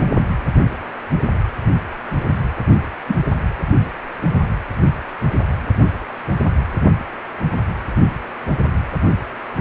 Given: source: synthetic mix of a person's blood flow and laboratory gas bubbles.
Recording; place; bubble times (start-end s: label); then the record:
Doppler ultrasound of blood flow; precordium
3.07-3.16 s: bubbles
From the record:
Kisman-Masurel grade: 122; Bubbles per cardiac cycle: 1 to 2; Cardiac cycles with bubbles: 10 to 50%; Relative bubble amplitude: moderate (0.250 to 0.450); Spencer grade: 2 (many but less than half of the cardiac periods contain bubble signals, singularly or in groups); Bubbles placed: anywhere in the cardiac cycle